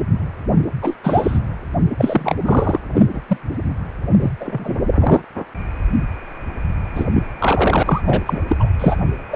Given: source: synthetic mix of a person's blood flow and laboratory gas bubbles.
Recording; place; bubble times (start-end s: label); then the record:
Doppler ultrasound of blood flow; precordium
0.82-0.97 s: bubbles
1.03-1.39 s: bubbles
1.98-2.35 s: bubbles
2.44-2.80 s: bubbles
2.94-3.06 s: bubbles
3.12-3.21 s: bubbles
3.27-3.37 s: bubbles
4.19-4.31 s: bubbles
4.40-4.77 s: bubbles
4.99-5.21 s: bubbles
6.95-7.04 s: bubbles
7.13-7.23 s: bubbles
7.38-8.02 s: bubbles
8.06-8.42 s: bubbles
8.47-8.56 s: bubbles
8.60-8.69 s: bubbles
8.79-8.97 s: bubbles
9.30-9.36 s: bubbles
From the record:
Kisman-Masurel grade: 233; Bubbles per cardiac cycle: several, 3 to 8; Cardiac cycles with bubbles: 50 to 99%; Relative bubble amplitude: loud (0.450 to 0.775); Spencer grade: 3 (all of the cardiac periods contain showers or single bubble signals, but not dominating or overriding the cardiac motion signals); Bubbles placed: anywhere in the cardiac cycle